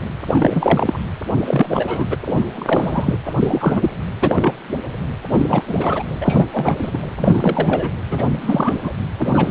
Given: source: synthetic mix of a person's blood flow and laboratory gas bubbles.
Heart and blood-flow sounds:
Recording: Doppler ultrasound of blood flow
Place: precordium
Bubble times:
0.26-1.01 s: bubbles
1.45-2.05 s: bubbles
2.08-2.17 s: bubbles
2.26-2.45 s: bubbles
2.54-3.15 s: bubbles
3.25-3.34 s: bubbles
3.39-3.90 s: bubbles
4.21-4.53 s: bubbles
5.30-5.63 s: bubbles
5.67-6.03 s: bubbles
6.21-6.46 s: bubbles
6.52-6.77 s: bubbles
6.81-6.98 s: bubbles
7.19-7.90 s: bubbles
8.10-8.36 s: bubbles
8.40-8.92 s: bubbles
9.17-9.51 s: bubbles
From the record:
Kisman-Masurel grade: 343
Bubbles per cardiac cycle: rolling drumbeat, 9 or more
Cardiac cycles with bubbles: 100%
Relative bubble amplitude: loud (0.450 to 0.775)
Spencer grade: 3 (all of the cardiac periods contain showers or single bubble signals, but not dominating or overriding the cardiac motion signals)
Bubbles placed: anywhere in the cardiac cycle

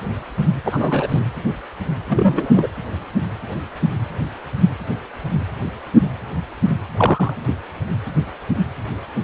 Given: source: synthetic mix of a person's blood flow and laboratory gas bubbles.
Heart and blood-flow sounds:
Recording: Doppler ultrasound of blood flow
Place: precordium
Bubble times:
0.65-1.20 s: bubbles
2.08-2.67 s: bubbles
6.97-7.33 s: bubbles
From the record:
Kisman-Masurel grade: 222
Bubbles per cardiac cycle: several, 3 to 8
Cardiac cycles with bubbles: 10 to 50%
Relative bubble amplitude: moderate (0.250 to 0.450)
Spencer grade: 2 (many but less than half of the cardiac periods contain bubble signals, singularly or in groups)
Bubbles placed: anywhere in the cardiac cycle

